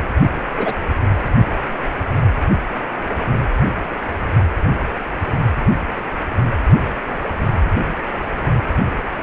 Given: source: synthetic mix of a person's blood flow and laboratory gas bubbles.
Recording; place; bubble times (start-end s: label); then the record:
Doppler ultrasound of blood flow; precordium
0.57-0.73 s: bubbles
From the record:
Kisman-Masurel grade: 112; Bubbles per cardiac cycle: 1 to 2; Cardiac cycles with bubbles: 1 to 10%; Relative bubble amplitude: moderate (0.250 to 0.450); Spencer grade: 1 (occasional bubble signal discernible with the cardiac motion signal, with majority of cardiac periods free of bubbles); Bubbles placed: anywhere in the cardiac cycle